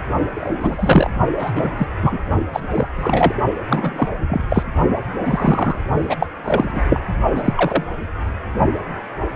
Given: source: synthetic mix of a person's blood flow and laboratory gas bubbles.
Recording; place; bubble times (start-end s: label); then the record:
Doppler ultrasound of blood flow; precordium
0.34-1.10 s: bubbles
1.39-1.51 s: bubbles
1.56-1.70 s: bubbles
1.77-1.87 s: bubbles
2.02-2.20 s: bubbles
2.52-2.60 s: bubbles
2.70-2.87 s: bubbles
2.96-3.34 s: bubbles
3.69-4.08 s: bubbles
4.28-4.44 s: bubbles
4.50-4.63 s: bubbles
5.25-5.77 s: bubbles
6.00-6.15 s: bubbles
6.19-6.27 s: bubbles
6.44-6.80 s: bubbles
6.89-7.00 s: bubbles
7.35-7.84 s: bubbles
9.33-9.36 s: bubbles
From the record:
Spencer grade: 3 (all of the cardiac periods contain showers or single bubble signals, but not dominating or overriding the cardiac motion signals); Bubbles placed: only in the low amplitude regions of the cardiac cycle